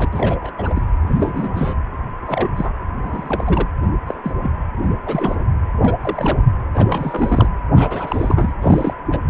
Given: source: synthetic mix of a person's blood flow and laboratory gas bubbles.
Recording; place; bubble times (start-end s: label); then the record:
Doppler ultrasound of blood flow; precordium
0.00-0.10 s: bubbles
0.12-0.52 s: bubbles
0.58-0.83 s: bubbles
1.07-1.75 s: bubbles
2.27-2.50 s: bubbles
2.55-2.72 s: bubbles
3.02-3.66 s: bubbles
4.07-4.15 s: bubbles
4.24-4.33 s: bubbles
4.43-4.51 s: bubbles
4.83-4.89 s: bubbles
5.06-5.35 s: bubbles
5.81-5.94 s: bubbles
6.02-6.39 s: bubbles
6.74-7.49 s: bubbles
7.76-8.53 s: bubbles
8.62-8.94 s: bubbles
9.12-9.18 s: bubbles
From the record:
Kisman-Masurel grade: 232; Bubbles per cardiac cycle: several, 3 to 8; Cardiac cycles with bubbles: 50 to 99%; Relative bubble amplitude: moderate (0.250 to 0.450); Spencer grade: 3 (all of the cardiac periods contain showers or single bubble signals, but not dominating or overriding the cardiac motion signals); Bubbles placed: anywhere in the cardiac cycle